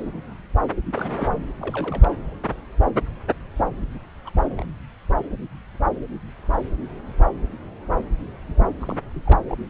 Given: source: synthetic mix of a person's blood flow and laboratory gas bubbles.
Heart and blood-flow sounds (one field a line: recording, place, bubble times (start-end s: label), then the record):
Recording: Doppler ultrasound of blood flow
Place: subclavian vein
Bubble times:
0.86-1.46 s: bubbles
1.61-2.13 s: bubbles
4.25-4.30 s: bubbles
4.33-4.67 s: bubbles
8.54-8.69 s: bubbles
8.79-8.97 s: bubbles
9.13-9.21 s: bubbles
9.25-9.45 s: bubbles
9.49-9.55 s: bubbles
From the record:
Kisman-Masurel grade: 221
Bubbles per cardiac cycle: several, 3 to 8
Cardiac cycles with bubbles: 10 to 50%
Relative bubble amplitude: barely perceptible (0.100 to 0.250)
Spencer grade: 2 (many but less than half of the cardiac periods contain bubble signals, singularly or in groups)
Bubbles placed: anywhere in the cardiac cycle